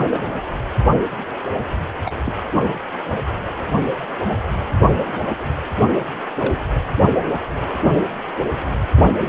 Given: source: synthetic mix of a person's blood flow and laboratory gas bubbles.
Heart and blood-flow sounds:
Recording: Doppler ultrasound of blood flow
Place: precordium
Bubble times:
0.00-0.07 s: bubbles
0.11-0.19 s: bubbles
2.04-2.12 s: bubbles
2.25-2.33 s: bubbles
4.95-5.14 s: bubbles
6.39-6.54 s: bubbles
From the record:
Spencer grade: 2 (many but less than half of the cardiac periods contain bubble signals, singularly or in groups)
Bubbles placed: anywhere in the cardiac cycle

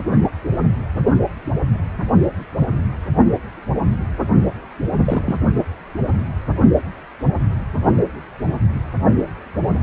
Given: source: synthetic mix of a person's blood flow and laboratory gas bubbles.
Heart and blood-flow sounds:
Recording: Doppler ultrasound of blood flow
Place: precordium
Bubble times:
5.04-5.36 s: bubbles
From the record:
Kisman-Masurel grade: 212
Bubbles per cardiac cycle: several, 3 to 8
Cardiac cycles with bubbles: 1 to 10%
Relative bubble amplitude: moderate (0.250 to 0.450)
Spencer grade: 1 (occasional bubble signal discernible with the cardiac motion signal, with majority of cardiac periods free of bubbles)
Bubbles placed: only in the low amplitude regions of the cardiac cycle

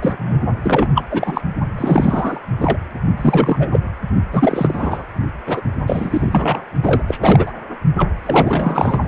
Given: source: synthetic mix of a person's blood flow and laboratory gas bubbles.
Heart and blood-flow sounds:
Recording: Doppler ultrasound of blood flow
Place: precordium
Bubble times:
0.00-0.16 s: bubbles
0.19-0.38 s: bubbles
0.62-0.88 s: bubbles
0.95-1.04 s: bubbles
1.10-1.41 s: bubbles
1.77-2.40 s: bubbles
2.60-2.77 s: bubbles
3.17-3.68 s: bubbles
3.72-3.79 s: bubbles
4.33-5.05 s: bubbles
5.46-5.61 s: bubbles
5.87-6.64 s: bubbles
6.83-7.03 s: bubbles
7.08-7.52 s: bubbles
7.96-8.09 s: bubbles
8.24-9.08 s: bubbles
From the record:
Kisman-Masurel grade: 343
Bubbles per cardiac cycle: rolling drumbeat, 9 or more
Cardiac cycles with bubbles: 100%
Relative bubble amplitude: loud (0.450 to 0.775)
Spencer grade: 3 (all of the cardiac periods contain showers or single bubble signals, but not dominating or overriding the cardiac motion signals)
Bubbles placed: only in the low amplitude regions of the cardiac cycle

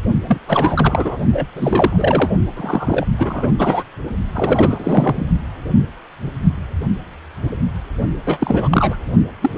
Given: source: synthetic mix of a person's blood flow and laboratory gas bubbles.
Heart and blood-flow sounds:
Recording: Doppler ultrasound of blood flow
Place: precordium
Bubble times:
0.27-0.38 s: bubbles
0.47-1.17 s: bubbles
1.33-1.46 s: bubbles
1.55-2.30 s: bubbles
2.56-3.05 s: bubbles
3.17-3.48 s: bubbles
3.58-3.83 s: bubbles
4.33-5.25 s: bubbles
8.26-8.97 s: bubbles
9.41-9.51 s: bubbles
9.54-9.58 s: bubbles
From the record:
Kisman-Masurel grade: 333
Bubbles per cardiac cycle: rolling drumbeat, 9 or more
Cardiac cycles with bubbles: 50 to 99%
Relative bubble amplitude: loud (0.450 to 0.775)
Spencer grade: 3 (all of the cardiac periods contain showers or single bubble signals, but not dominating or overriding the cardiac motion signals)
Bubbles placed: only in the low amplitude regions of the cardiac cycle

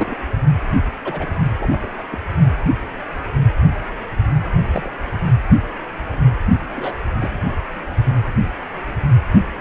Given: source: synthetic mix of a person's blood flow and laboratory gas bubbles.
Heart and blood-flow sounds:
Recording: Doppler ultrasound of blood flow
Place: precordium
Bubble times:
0.00-0.17 s: bubbles
0.69-0.78 s: bubbles
1.04-1.26 s: bubbles
1.59-1.89 s: bubbles
2.11-2.18 s: bubbles
4.73-4.90 s: bubbles
6.75-6.95 s: bubbles
7.19-7.30 s: bubbles
From the record:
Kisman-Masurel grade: 122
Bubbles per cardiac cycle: 1 to 2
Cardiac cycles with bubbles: 10 to 50%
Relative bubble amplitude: moderate (0.250 to 0.450)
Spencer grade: 2 (many but less than half of the cardiac periods contain bubble signals, singularly or in groups)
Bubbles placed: only in the low amplitude regions of the cardiac cycle

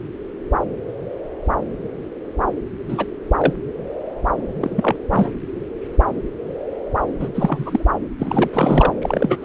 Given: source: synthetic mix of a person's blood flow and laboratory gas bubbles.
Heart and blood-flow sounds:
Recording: Doppler ultrasound of blood flow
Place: subclavian vein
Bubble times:
2.88-3.06 s: bubbles
3.38-3.54 s: bubbles
4.60-4.96 s: bubbles
5.08-5.31 s: bubbles
7.20-7.29 s: bubbles
7.34-7.85 s: bubbles
8.19-8.50 s: bubbles
8.53-8.94 s: bubbles
9.02-9.44 s: bubbles
From the record:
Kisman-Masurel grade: 232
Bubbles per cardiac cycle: several, 3 to 8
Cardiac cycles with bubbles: 50 to 99%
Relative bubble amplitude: moderate (0.250 to 0.450)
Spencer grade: 3 (all of the cardiac periods contain showers or single bubble signals, but not dominating or overriding the cardiac motion signals)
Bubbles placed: anywhere in the cardiac cycle

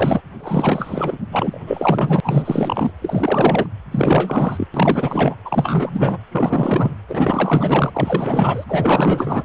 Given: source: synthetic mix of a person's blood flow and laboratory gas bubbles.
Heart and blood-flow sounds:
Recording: Doppler ultrasound of blood flow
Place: precordium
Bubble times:
0.00-0.21 s: bubbles
0.40-1.19 s: bubbles
1.31-1.59 s: bubbles
1.67-2.20 s: bubbles
2.23-2.91 s: bubbles
3.01-3.66 s: bubbles
3.91-4.67 s: bubbles
4.74-5.35 s: bubbles
5.45-6.19 s: bubbles
6.32-6.94 s: bubbles
7.08-8.64 s: bubbles
8.67-9.43 s: bubbles
From the record:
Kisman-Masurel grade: 444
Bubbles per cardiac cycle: continuous sound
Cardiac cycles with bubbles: 100%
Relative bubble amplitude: maximal (0.775 to 0.999)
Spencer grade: 4 (maximum detectable bubble signal sounding continuously throughout systole and diastole of every cardiac period, and overriding the amplitude of the normal cardiac signals)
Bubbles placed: anywhere in the cardiac cycle

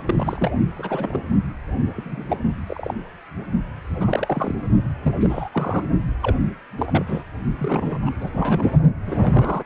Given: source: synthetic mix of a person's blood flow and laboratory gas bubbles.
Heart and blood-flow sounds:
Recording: Doppler ultrasound of blood flow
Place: precordium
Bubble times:
0.00-0.51 s: bubbles
0.76-1.19 s: bubbles
1.94-2.39 s: bubbles
2.67-2.94 s: bubbles
4.00-4.54 s: bubbles
5.02-5.13 s: bubbles
5.20-5.49 s: bubbles
5.52-5.86 s: bubbles
6.22-6.35 s: bubbles
6.78-7.23 s: bubbles
7.58-7.98 s: bubbles
8.05-8.11 s: bubbles
8.21-8.81 s: bubbles
9.06-9.63 s: bubbles
From the record:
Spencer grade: 3 (all of the cardiac periods contain showers or single bubble signals, but not dominating or overriding the cardiac motion signals)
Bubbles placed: only in the low amplitude regions of the cardiac cycle

